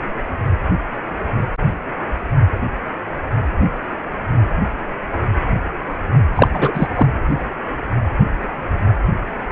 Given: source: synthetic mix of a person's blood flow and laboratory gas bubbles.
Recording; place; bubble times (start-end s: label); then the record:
Doppler ultrasound of blood flow; precordium
6.36-6.48 s: bubbles
6.54-6.88 s: bubbles
6.95-7.08 s: bubbles
From the record:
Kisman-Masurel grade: 223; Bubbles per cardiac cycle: several, 3 to 8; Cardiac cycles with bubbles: 10 to 50%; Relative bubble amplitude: loud (0.450 to 0.775); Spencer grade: 2 (many but less than half of the cardiac periods contain bubble signals, singularly or in groups); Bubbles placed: anywhere in the cardiac cycle